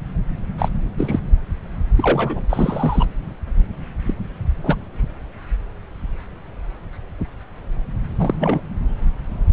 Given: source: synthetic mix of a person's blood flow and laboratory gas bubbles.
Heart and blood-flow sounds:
Doppler ultrasound of blood flow; subclavian vein
0.58-0.68 s: bubbles
0.97-1.19 s: bubbles
1.97-2.44 s: bubbles
2.49-3.06 s: bubbles
4.06-4.14 s: bubbles
4.64-4.75 s: bubbles
8.18-8.61 s: bubbles
From the record:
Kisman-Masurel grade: 222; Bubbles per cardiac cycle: several, 3 to 8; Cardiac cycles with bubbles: 10 to 50%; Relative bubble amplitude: moderate (0.250 to 0.450); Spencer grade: 2 (many but less than half of the cardiac periods contain bubble signals, singularly or in groups); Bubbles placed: anywhere in the cardiac cycle

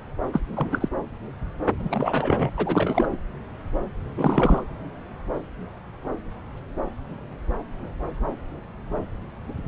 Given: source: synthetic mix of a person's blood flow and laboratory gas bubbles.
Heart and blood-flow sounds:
Doppler ultrasound of blood flow; subclavian vein
0.33-0.40 s: bubbles
0.55-0.88 s: bubbles
1.79-2.51 s: bubbles
2.56-3.17 s: bubbles
4.18-4.63 s: bubbles
From the record:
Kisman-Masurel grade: 223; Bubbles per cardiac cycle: several, 3 to 8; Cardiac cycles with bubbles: 10 to 50%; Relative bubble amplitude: loud (0.450 to 0.775); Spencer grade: 2 (many but less than half of the cardiac periods contain bubble signals, singularly or in groups); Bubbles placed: anywhere in the cardiac cycle

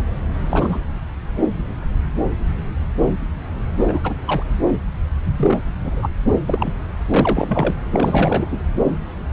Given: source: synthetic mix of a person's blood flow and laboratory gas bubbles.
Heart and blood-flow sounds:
Doppler ultrasound of blood flow; subclavian vein
0.39-0.79 s: bubbles
3.88-4.00 s: bubbles
4.04-4.13 s: bubbles
4.27-4.43 s: bubbles
5.38-5.58 s: bubbles
5.83-6.10 s: bubbles
6.46-6.73 s: bubbles
7.13-7.74 s: bubbles
7.92-8.60 s: bubbles
From the record:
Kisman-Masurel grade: 222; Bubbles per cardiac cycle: several, 3 to 8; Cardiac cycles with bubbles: 10 to 50%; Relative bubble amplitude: moderate (0.250 to 0.450); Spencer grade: 2 (many but less than half of the cardiac periods contain bubble signals, singularly or in groups); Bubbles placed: anywhere in the cardiac cycle

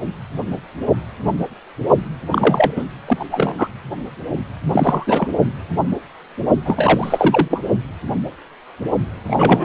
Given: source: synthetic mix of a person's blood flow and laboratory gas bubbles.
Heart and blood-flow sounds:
Doppler ultrasound of blood flow; precordium
2.31-2.71 s: bubbles
2.76-2.84 s: bubbles
3.06-3.25 s: bubbles
3.31-3.54 s: bubbles
3.58-3.68 s: bubbles
4.72-5.30 s: bubbles
6.65-7.61 s: bubbles
9.27-9.65 s: bubbles
From the record:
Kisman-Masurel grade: 333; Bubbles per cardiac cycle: rolling drumbeat, 9 or more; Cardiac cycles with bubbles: 50 to 99%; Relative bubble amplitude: loud (0.450 to 0.775); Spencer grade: 3 (all of the cardiac periods contain showers or single bubble signals, but not dominating or overriding the cardiac motion signals); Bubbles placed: only in the low amplitude regions of the cardiac cycle

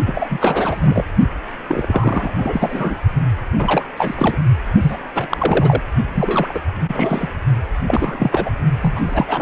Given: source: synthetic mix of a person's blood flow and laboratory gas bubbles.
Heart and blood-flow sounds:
Doppler ultrasound of blood flow; precordium
0.05-1.06 s: bubbles
1.68-2.32 s: bubbles
2.36-2.96 s: bubbles
3.57-3.83 s: bubbles
3.96-4.38 s: bubbles
4.81-4.99 s: bubbles
5.14-5.27 s: bubbles
5.29-5.82 s: bubbles
6.14-6.60 s: bubbles
6.88-7.29 s: bubbles
7.87-8.51 s: bubbles
8.81-9.42 s: bubbles
From the record:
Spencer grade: 3 (all of the cardiac periods contain showers or single bubble signals, but not dominating or overriding the cardiac motion signals); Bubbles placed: only in the low amplitude regions of the cardiac cycle

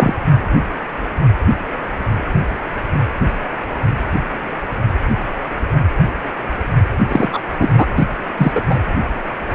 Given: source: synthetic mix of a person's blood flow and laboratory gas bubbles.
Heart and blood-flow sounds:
Doppler ultrasound of blood flow; precordium
0.00-0.14 s: bubbles
7.08-7.42 s: bubbles
7.60-7.70 s: bubbles
7.75-7.88 s: bubbles
7.96-8.05 s: bubbles
8.37-8.62 s: bubbles
8.69-8.79 s: bubbles
From the record:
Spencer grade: 2 (many but less than half of the cardiac periods contain bubble signals, singularly or in groups); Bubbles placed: anywhere in the cardiac cycle

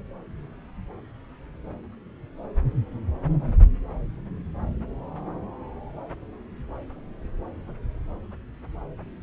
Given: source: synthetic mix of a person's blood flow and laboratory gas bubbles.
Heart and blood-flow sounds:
Doppler ultrasound of blood flow; subclavian vein
no bubbles
From the record:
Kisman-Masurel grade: 000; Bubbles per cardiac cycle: 0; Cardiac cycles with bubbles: 0%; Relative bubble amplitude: no bubbles discernible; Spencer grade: 0 (complete lack of bubble signals)

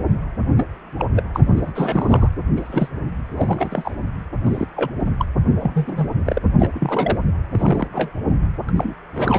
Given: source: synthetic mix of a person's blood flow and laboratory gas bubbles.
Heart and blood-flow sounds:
Doppler ultrasound of blood flow; precordium
0.56-0.68 s: bubbles
0.98-1.05 s: bubbles
1.16-1.23 s: bubbles
1.34-1.73 s: bubbles
1.75-2.29 s: bubbles
2.56-2.90 s: bubbles
3.37-3.96 s: bubbles
4.43-4.66 s: bubbles
4.76-4.91 s: bubbles
5.00-5.10 s: bubbles
5.19-5.25 s: bubbles
5.59-6.09 s: bubbles
6.25-6.39 s: bubbles
6.59-6.68 s: bubbles
6.73-7.18 s: bubbles
7.51-8.11 s: bubbles
8.69-8.71 s: bubbles
8.76-8.96 s: bubbles
9.14-9.39 s: bubbles
From the record:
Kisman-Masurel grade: 242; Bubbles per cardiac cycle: several, 3 to 8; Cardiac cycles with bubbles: 100%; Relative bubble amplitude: moderate (0.250 to 0.450); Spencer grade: 3 (all of the cardiac periods contain showers or single bubble signals, but not dominating or overriding the cardiac motion signals); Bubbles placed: anywhere in the cardiac cycle

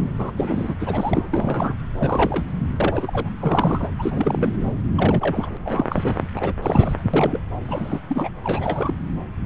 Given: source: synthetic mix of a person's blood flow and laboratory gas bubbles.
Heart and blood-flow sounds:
Doppler ultrasound of blood flow; subclavian vein
0.19-0.32 s: bubbles
0.37-0.74 s: bubbles
0.79-1.76 s: bubbles
1.98-2.44 s: bubbles
2.80-3.30 s: bubbles
3.40-3.90 s: bubbles
3.98-4.55 s: bubbles
4.97-5.57 s: bubbles
5.65-5.86 s: bubbles
5.89-6.19 s: bubbles
6.36-6.54 s: bubbles
6.62-7.02 s: bubbles
7.13-7.40 s: bubbles
7.65-8.00 s: bubbles
8.09-8.29 s: bubbles
8.42-8.94 s: bubbles
From the record:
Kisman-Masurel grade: 332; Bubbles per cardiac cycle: rolling drumbeat, 9 or more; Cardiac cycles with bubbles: 50 to 99%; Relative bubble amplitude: moderate (0.250 to 0.450); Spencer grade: 3 (all of the cardiac periods contain showers or single bubble signals, but not dominating or overriding the cardiac motion signals); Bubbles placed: anywhere in the cardiac cycle

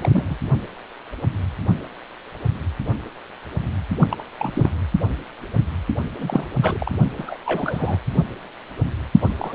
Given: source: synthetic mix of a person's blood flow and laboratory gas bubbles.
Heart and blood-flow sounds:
Doppler ultrasound of blood flow; precordium
0.00-0.38 s: bubbles
3.99-4.07 s: bubbles
4.09-4.29 s: bubbles
4.38-4.71 s: bubbles
6.16-6.46 s: bubbles
6.62-6.92 s: bubbles
7.18-7.38 s: bubbles
7.46-7.97 s: bubbles
9.20-9.31 s: bubbles
9.38-9.55 s: bubbles
From the record:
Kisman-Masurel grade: 221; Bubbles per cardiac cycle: several, 3 to 8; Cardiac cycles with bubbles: 10 to 50%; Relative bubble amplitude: barely perceptible (0.100 to 0.250); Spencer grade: 2 (many but less than half of the cardiac periods contain bubble signals, singularly or in groups); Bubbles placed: only in the low amplitude regions of the cardiac cycle

